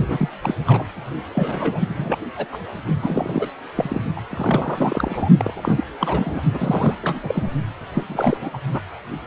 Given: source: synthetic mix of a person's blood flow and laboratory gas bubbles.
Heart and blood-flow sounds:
Doppler ultrasound of blood flow; precordium
0.00-0.29 s: bubbles
0.41-0.55 s: bubbles
0.66-0.84 s: bubbles
1.35-2.18 s: bubbles
2.37-2.48 s: bubbles
2.52-2.57 s: bubbles
3.00-3.48 s: bubbles
3.75-4.04 s: bubbles
4.16-4.21 s: bubbles
4.29-5.29 s: bubbles
5.37-5.86 s: bubbles
5.99-6.42 s: bubbles
6.54-6.95 s: bubbles
7.03-7.20 s: bubbles
7.23-7.50 s: bubbles
7.94-8.03 s: bubbles
8.08-8.38 s: bubbles
8.40-8.50 s: bubbles
8.53-8.57 s: bubbles
8.71-8.80 s: bubbles
From the record:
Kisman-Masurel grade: 342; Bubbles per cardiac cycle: rolling drumbeat, 9 or more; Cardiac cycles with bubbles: 100%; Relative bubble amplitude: moderate (0.250 to 0.450); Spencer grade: 3 (all of the cardiac periods contain showers or single bubble signals, but not dominating or overriding the cardiac motion signals); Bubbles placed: only in the low amplitude regions of the cardiac cycle

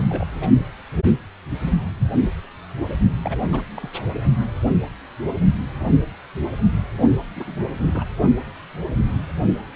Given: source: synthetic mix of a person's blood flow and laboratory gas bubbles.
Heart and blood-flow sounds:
Doppler ultrasound of blood flow; precordium
0.00-0.27 s: bubbles
0.33-0.47 s: bubbles
3.22-3.89 s: bubbles
7.36-7.55 s: bubbles
7.58-7.63 s: bubbles
7.75-8.04 s: bubbles
From the record:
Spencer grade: 2 (many but less than half of the cardiac periods contain bubble signals, singularly or in groups); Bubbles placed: only in the low amplitude regions of the cardiac cycle

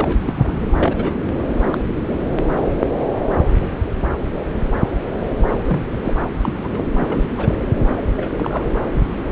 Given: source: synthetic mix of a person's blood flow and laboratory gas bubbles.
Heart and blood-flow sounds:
Doppler ultrasound of blood flow; subclavian vein
0.00-0.18 s: bubbles
0.25-0.69 s: bubbles
0.78-1.16 s: bubbles
1.73-1.78 s: bubbles
1.89-2.17 s: bubbles
5.65-5.83 s: bubbles
6.04-6.15 s: bubbles
6.42-6.88 s: bubbles
6.99-7.29 s: bubbles
7.35-7.61 s: bubbles
8.15-8.63 s: bubbles
From the record:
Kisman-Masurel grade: 232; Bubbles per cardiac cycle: several, 3 to 8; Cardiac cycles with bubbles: 50 to 99%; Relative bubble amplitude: moderate (0.250 to 0.450); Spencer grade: 3 (all of the cardiac periods contain showers or single bubble signals, but not dominating or overriding the cardiac motion signals); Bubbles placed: anywhere in the cardiac cycle

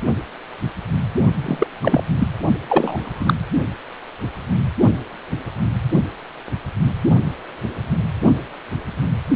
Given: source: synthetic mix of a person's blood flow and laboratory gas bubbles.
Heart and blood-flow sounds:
Doppler ultrasound of blood flow; precordium
1.44-1.67 s: bubbles
1.82-2.01 s: bubbles
2.19-2.28 s: bubbles
2.69-3.35 s: bubbles
From the record:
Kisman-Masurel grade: 223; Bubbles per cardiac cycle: several, 3 to 8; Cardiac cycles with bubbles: 10 to 50%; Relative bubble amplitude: loud (0.450 to 0.775); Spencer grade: 2 (many but less than half of the cardiac periods contain bubble signals, singularly or in groups); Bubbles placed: only in the low amplitude regions of the cardiac cycle

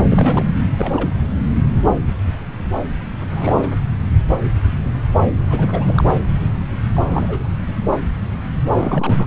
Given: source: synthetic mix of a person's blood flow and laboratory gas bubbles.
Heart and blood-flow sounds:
Doppler ultrasound of blood flow; subclavian vein
0.00-0.04 s: bubbles
0.09-0.45 s: bubbles
0.77-1.07 s: bubbles
3.30-3.71 s: bubbles
5.50-6.04 s: bubbles
6.94-7.42 s: bubbles
8.74-9.25 s: bubbles
From the record:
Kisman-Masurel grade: 222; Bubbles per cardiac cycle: several, 3 to 8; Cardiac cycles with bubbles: 10 to 50%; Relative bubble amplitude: moderate (0.250 to 0.450); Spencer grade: 2 (many but less than half of the cardiac periods contain bubble signals, singularly or in groups); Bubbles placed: anywhere in the cardiac cycle

